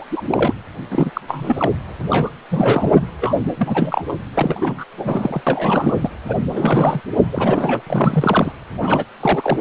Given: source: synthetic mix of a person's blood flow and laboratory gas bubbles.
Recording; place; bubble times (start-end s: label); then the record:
Doppler ultrasound of blood flow; precordium
0.00-0.08 s: bubbles
0.11-0.22 s: bubbles
0.27-0.53 s: bubbles
0.91-1.10 s: bubbles
1.14-1.21 s: bubbles
1.27-1.71 s: bubbles
2.09-2.30 s: bubbles
2.50-3.00 s: bubbles
3.21-3.35 s: bubbles
3.58-4.16 s: bubbles
4.34-4.84 s: bubbles
4.97-5.42 s: bubbles
5.46-6.10 s: bubbles
6.29-6.37 s: bubbles
6.49-7.00 s: bubbles
7.32-7.82 s: bubbles
7.86-8.52 s: bubbles
8.81-9.05 s: bubbles
9.20-9.61 s: bubbles
From the record:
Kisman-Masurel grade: 342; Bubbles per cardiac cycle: rolling drumbeat, 9 or more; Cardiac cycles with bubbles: 100%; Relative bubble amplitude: moderate (0.250 to 0.450); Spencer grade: 3 (all of the cardiac periods contain showers or single bubble signals, but not dominating or overriding the cardiac motion signals); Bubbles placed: anywhere in the cardiac cycle